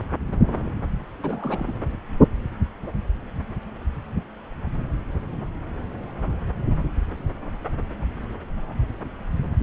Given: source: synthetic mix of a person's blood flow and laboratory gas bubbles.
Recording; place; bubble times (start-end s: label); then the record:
Doppler ultrasound of blood flow; subclavian vein
1.19-1.77 s: bubbles
From the record:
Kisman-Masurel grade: 211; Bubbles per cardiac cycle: several, 3 to 8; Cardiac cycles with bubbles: 1 to 10%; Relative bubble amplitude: barely perceptible (0.100 to 0.250); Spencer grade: 1 (occasional bubble signal discernible with the cardiac motion signal, with majority of cardiac periods free of bubbles); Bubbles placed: anywhere in the cardiac cycle